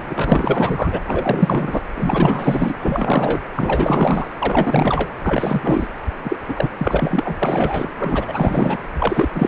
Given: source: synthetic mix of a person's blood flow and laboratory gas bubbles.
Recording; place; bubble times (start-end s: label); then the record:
Doppler ultrasound of blood flow; precordium
0.09-1.00 s: bubbles
1.06-1.84 s: bubbles
1.96-2.75 s: bubbles
2.80-3.40 s: bubbles
3.56-4.32 s: bubbles
4.40-5.11 s: bubbles
5.24-5.88 s: bubbles
6.24-6.37 s: bubbles
6.48-6.70 s: bubbles
6.78-7.39 s: bubbles
7.42-7.89 s: bubbles
7.98-8.77 s: bubbles
8.98-9.28 s: bubbles
9.33-9.47 s: bubbles
From the record:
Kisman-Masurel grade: 444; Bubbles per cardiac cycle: continuous sound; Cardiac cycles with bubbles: 100%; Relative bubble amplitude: maximal (0.775 to 0.999); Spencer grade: 4 (maximum detectable bubble signal sounding continuously throughout systole and diastole of every cardiac period, and overriding the amplitude of the normal cardiac signals); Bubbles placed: anywhere in the cardiac cycle